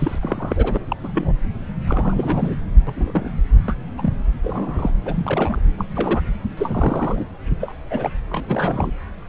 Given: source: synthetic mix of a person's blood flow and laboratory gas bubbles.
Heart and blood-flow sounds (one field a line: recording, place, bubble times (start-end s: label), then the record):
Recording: Doppler ultrasound of blood flow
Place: subclavian vein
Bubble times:
0.00-0.85 s: bubbles
0.89-0.96 s: bubbles
1.03-1.32 s: bubbles
1.87-2.56 s: bubbles
2.87-3.31 s: bubbles
3.68-3.75 s: bubbles
3.98-4.14 s: bubbles
4.43-4.92 s: bubbles
5.06-5.60 s: bubbles
5.78-5.85 s: bubbles
5.94-6.21 s: bubbles
6.57-7.25 s: bubbles
7.61-7.74 s: bubbles
7.90-8.10 s: bubbles
8.29-8.92 s: bubbles
From the record:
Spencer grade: 3 (all of the cardiac periods contain showers or single bubble signals, but not dominating or overriding the cardiac motion signals)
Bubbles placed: anywhere in the cardiac cycle